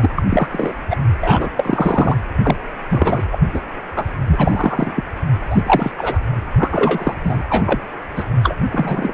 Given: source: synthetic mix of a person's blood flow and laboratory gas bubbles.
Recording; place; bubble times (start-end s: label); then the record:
Doppler ultrasound of blood flow; precordium
0.00-0.09 s: bubbles
0.17-0.24 s: bubbles
0.29-0.49 s: bubbles
0.52-0.73 s: bubbles
0.90-0.97 s: bubbles
1.21-1.50 s: bubbles
1.57-2.17 s: bubbles
2.44-2.58 s: bubbles
2.90-3.21 s: bubbles
3.31-3.39 s: bubbles
3.54-3.62 s: bubbles
3.96-4.05 s: bubbles
4.27-4.92 s: bubbles
4.96-5.04 s: bubbles
5.50-5.62 s: bubbles
5.66-5.92 s: bubbles
5.98-6.20 s: bubbles
6.58-7.14 s: bubbles
7.24-7.43 s: bubbles
7.50-7.81 s: bubbles
8.15-8.24 s: bubbles
8.42-8.55 s: bubbles
8.72-9.12 s: bubbles
From the record:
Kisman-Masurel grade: 243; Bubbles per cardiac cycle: several, 3 to 8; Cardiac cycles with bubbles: 100%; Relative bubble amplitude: loud (0.450 to 0.775); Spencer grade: 3 (all of the cardiac periods contain showers or single bubble signals, but not dominating or overriding the cardiac motion signals); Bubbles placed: anywhere in the cardiac cycle